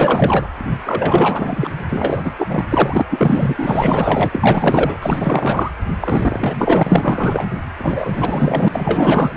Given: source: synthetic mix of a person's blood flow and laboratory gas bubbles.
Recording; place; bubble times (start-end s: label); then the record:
Doppler ultrasound of blood flow; precordium
0.00-0.49 s: bubbles
0.75-1.71 s: bubbles
1.90-2.34 s: bubbles
2.38-2.65 s: bubbles
2.69-3.05 s: bubbles
3.09-3.54 s: bubbles
3.58-4.29 s: bubbles
4.32-5.71 s: bubbles
6.00-7.50 s: bubbles
7.78-8.69 s: bubbles
8.71-9.34 s: bubbles
From the record:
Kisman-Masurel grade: 444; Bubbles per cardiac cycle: continuous sound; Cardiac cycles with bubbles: 100%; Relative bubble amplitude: maximal (0.775 to 0.999); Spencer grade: 4 (maximum detectable bubble signal sounding continuously throughout systole and diastole of every cardiac period, and overriding the amplitude of the normal cardiac signals); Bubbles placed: anywhere in the cardiac cycle